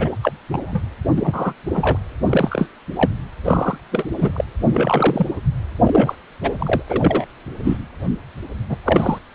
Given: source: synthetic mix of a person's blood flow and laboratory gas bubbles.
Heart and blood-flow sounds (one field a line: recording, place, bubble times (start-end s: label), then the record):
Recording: Doppler ultrasound of blood flow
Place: precordium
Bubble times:
0.00-0.09 s: bubbles
0.22-0.33 s: bubbles
0.51-0.81 s: bubbles
1.17-1.53 s: bubbles
1.70-1.97 s: bubbles
2.26-2.68 s: bubbles
2.96-3.11 s: bubbles
3.45-3.78 s: bubbles
3.92-4.07 s: bubbles
4.17-4.45 s: bubbles
4.62-5.27 s: bubbles
5.81-6.15 s: bubbles
6.42-6.83 s: bubbles
6.88-7.25 s: bubbles
7.64-7.77 s: bubbles
8.69-8.76 s: bubbles
8.85-9.18 s: bubbles
From the record:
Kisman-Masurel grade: 233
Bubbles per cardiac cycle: several, 3 to 8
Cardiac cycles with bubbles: 50 to 99%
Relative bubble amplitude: loud (0.450 to 0.775)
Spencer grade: 3 (all of the cardiac periods contain showers or single bubble signals, but not dominating or overriding the cardiac motion signals)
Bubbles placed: anywhere in the cardiac cycle